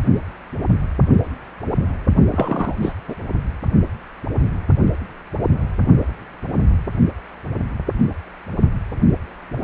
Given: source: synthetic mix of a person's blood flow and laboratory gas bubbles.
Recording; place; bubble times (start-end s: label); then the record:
Doppler ultrasound of blood flow; precordium
2.30-2.75 s: bubbles
2.81-2.94 s: bubbles
3.08-3.15 s: bubbles
From the record:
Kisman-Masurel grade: 212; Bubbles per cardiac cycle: several, 3 to 8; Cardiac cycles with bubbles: 1 to 10%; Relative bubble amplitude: moderate (0.250 to 0.450); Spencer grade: 1 (occasional bubble signal discernible with the cardiac motion signal, with majority of cardiac periods free of bubbles); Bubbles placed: only in the low amplitude regions of the cardiac cycle